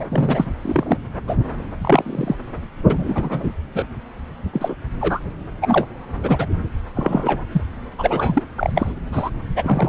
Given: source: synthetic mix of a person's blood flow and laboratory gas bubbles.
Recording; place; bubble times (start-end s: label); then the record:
Doppler ultrasound of blood flow; subclavian vein
0.00-0.07 s: bubbles
0.11-0.53 s: bubbles
0.62-0.97 s: bubbles
1.27-1.34 s: bubbles
1.81-2.35 s: bubbles
2.90-3.51 s: bubbles
3.73-3.85 s: bubbles
4.53-4.75 s: bubbles
5.01-5.20 s: bubbles
5.62-5.87 s: bubbles
6.23-6.46 s: bubbles
6.95-7.44 s: bubbles
7.52-7.62 s: bubbles
7.98-8.43 s: bubbles
8.57-8.71 s: bubbles
8.74-8.92 s: bubbles
9.12-9.30 s: bubbles
9.55-9.89 s: bubbles
From the record:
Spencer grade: 3 (all of the cardiac periods contain showers or single bubble signals, but not dominating or overriding the cardiac motion signals); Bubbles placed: anywhere in the cardiac cycle